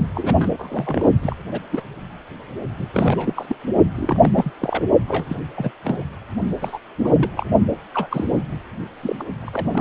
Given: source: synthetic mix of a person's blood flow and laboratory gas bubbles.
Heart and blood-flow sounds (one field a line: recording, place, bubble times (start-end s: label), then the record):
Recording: Doppler ultrasound of blood flow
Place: precordium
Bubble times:
0.14-1.11 s: bubbles
1.22-1.36 s: bubbles
1.51-1.60 s: bubbles
1.70-1.83 s: bubbles
2.77-2.88 s: bubbles
2.94-3.33 s: bubbles
3.35-3.56 s: bubbles
3.96-4.30 s: bubbles
4.35-4.50 s: bubbles
4.58-4.84 s: bubbles
5.08-5.25 s: bubbles
5.28-5.36 s: bubbles
5.57-5.71 s: bubbles
5.84-6.03 s: bubbles
6.61-6.78 s: bubbles
7.04-7.46 s: bubbles
7.94-8.08 s: bubbles
8.11-8.39 s: bubbles
9.03-9.24 s: bubbles
9.42-9.50 s: bubbles
9.52-9.69 s: bubbles
9.71-9.81 s: bubbles
From the record:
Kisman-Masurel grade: 242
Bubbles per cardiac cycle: several, 3 to 8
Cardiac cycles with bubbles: 100%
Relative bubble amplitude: moderate (0.250 to 0.450)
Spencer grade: 3 (all of the cardiac periods contain showers or single bubble signals, but not dominating or overriding the cardiac motion signals)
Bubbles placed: only in the low amplitude regions of the cardiac cycle